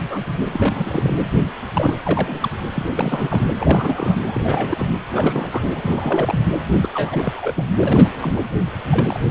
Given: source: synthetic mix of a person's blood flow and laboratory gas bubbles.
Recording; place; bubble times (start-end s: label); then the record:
Doppler ultrasound of blood flow; precordium
0.10-0.23 s: bubbles
0.46-0.48 s: bubbles
0.53-1.15 s: bubbles
1.73-2.00 s: bubbles
2.05-2.49 s: bubbles
2.75-2.86 s: bubbles
2.95-3.51 s: bubbles
3.60-4.16 s: bubbles
4.26-4.86 s: bubbles
5.12-5.69 s: bubbles
5.75-6.40 s: bubbles
6.81-6.89 s: bubbles
6.94-7.53 s: bubbles
7.56-7.64 s: bubbles
7.78-8.44 s: bubbles
8.89-9.20 s: bubbles
9.25-9.31 s: bubbles
From the record:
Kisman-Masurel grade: 342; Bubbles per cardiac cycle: rolling drumbeat, 9 or more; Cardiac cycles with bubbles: 100%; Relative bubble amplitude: moderate (0.250 to 0.450); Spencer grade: 3 (all of the cardiac periods contain showers or single bubble signals, but not dominating or overriding the cardiac motion signals); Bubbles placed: anywhere in the cardiac cycle